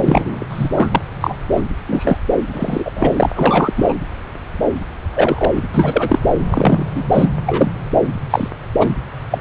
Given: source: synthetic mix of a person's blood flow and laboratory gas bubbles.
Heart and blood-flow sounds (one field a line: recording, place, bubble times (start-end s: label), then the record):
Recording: Doppler ultrasound of blood flow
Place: subclavian vein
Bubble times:
0.01-0.46 s: bubbles
0.49-0.70 s: bubbles
0.76-1.02 s: bubbles
1.21-1.36 s: bubbles
1.53-1.61 s: bubbles
1.86-2.17 s: bubbles
2.52-2.92 s: bubbles
2.95-3.27 s: bubbles
3.35-3.73 s: bubbles
3.76-3.93 s: bubbles
5.13-5.51 s: bubbles
5.55-5.63 s: bubbles
5.73-6.19 s: bubbles
6.50-6.85 s: bubbles
6.95-7.04 s: bubbles
7.12-7.29 s: bubbles
7.46-7.73 s: bubbles
8.30-8.48 s: bubbles
8.79-8.94 s: bubbles
9.30-9.38 s: bubbles
From the record:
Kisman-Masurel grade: 233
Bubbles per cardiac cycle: several, 3 to 8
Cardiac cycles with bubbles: 50 to 99%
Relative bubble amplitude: loud (0.450 to 0.775)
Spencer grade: 3 (all of the cardiac periods contain showers or single bubble signals, but not dominating or overriding the cardiac motion signals)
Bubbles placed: anywhere in the cardiac cycle